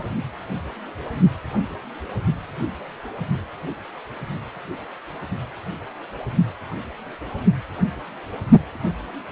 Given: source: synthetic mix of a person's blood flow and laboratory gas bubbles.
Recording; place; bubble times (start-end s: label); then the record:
Doppler ultrasound of blood flow; precordium
0.00-0.03 s: bubbles
From the record:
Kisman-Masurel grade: 212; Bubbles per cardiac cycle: several, 3 to 8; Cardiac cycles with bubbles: 1 to 10%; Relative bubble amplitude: moderate (0.250 to 0.450); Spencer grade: 1 (occasional bubble signal discernible with the cardiac motion signal, with majority of cardiac periods free of bubbles); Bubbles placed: only in the low amplitude regions of the cardiac cycle